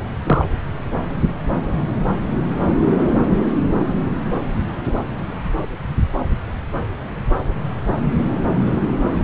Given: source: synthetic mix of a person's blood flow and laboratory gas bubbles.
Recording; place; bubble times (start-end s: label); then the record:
Doppler ultrasound of blood flow; subclavian vein
0.24-0.45 s: bubbles
From the record:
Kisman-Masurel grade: 213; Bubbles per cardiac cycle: several, 3 to 8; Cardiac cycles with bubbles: 1 to 10%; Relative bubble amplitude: loud (0.450 to 0.775); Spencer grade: 1 (occasional bubble signal discernible with the cardiac motion signal, with majority of cardiac periods free of bubbles); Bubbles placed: anywhere in the cardiac cycle